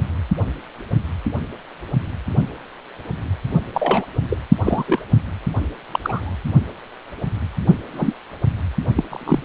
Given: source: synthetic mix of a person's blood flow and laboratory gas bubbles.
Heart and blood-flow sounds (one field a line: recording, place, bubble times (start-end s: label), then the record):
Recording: Doppler ultrasound of blood flow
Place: precordium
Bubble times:
3.74-4.06 s: bubbles
4.29-4.37 s: bubbles
4.64-4.84 s: bubbles
4.87-5.00 s: bubbles
5.92-6.00 s: bubbles
6.04-6.33 s: bubbles
7.93-8.13 s: bubbles
8.96-9.04 s: bubbles
9.07-9.45 s: bubbles
From the record:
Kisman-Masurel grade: 232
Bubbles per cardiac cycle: several, 3 to 8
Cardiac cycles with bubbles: 50 to 99%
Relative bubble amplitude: moderate (0.250 to 0.450)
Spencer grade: 3 (all of the cardiac periods contain showers or single bubble signals, but not dominating or overriding the cardiac motion signals)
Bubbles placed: only in the low amplitude regions of the cardiac cycle